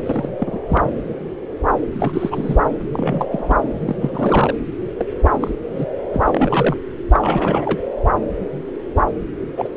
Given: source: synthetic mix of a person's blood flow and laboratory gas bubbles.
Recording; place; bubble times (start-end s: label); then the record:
Doppler ultrasound of blood flow; subclavian vein
0.05-0.29 s: bubbles
0.38-0.59 s: bubbles
0.68-0.90 s: bubbles
1.94-2.59 s: bubbles
2.93-3.26 s: bubbles
3.31-3.56 s: bubbles
3.85-3.96 s: bubbles
4.00-4.54 s: bubbles
4.99-5.05 s: bubbles
5.40-5.51 s: bubbles
5.75-5.86 s: bubbles
6.13-6.20 s: bubbles
6.25-6.76 s: bubbles
7.12-7.83 s: bubbles
9.56-9.69 s: bubbles
From the record:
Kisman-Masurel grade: 232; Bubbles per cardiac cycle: several, 3 to 8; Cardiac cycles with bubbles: 50 to 99%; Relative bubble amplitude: moderate (0.250 to 0.450); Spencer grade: 3 (all of the cardiac periods contain showers or single bubble signals, but not dominating or overriding the cardiac motion signals); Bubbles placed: anywhere in the cardiac cycle